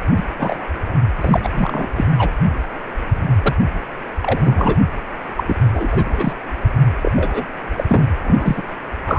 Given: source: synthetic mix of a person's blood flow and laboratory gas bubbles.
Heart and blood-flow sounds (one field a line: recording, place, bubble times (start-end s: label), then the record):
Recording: Doppler ultrasound of blood flow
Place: precordium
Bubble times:
0.16-0.24 s: bubbles
0.38-0.67 s: bubbles
1.21-1.49 s: bubbles
1.54-1.86 s: bubbles
1.95-2.05 s: bubbles
2.17-2.30 s: bubbles
3.42-3.56 s: bubbles
4.22-4.78 s: bubbles
5.37-5.44 s: bubbles
5.46-5.56 s: bubbles
5.74-5.89 s: bubbles
5.92-6.33 s: bubbles
7.02-7.12 s: bubbles
7.16-7.45 s: bubbles
7.72-7.84 s: bubbles
7.88-8.06 s: bubbles
8.24-8.62 s: bubbles
9.06-9.19 s: bubbles
From the record:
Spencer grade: 3 (all of the cardiac periods contain showers or single bubble signals, but not dominating or overriding the cardiac motion signals)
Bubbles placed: anywhere in the cardiac cycle